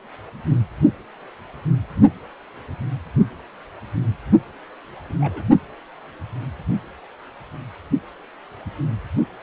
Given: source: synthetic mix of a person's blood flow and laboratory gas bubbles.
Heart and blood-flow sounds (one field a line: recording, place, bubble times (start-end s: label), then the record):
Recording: Doppler ultrasound of blood flow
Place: precordium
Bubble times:
5.09-5.13 s: bubbles
5.20-5.44 s: bubbles
From the record:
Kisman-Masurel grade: 111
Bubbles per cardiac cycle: 1 to 2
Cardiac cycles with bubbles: 1 to 10%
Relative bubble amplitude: barely perceptible (0.100 to 0.250)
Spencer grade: 1 (occasional bubble signal discernible with the cardiac motion signal, with majority of cardiac periods free of bubbles)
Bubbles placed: only in the low amplitude regions of the cardiac cycle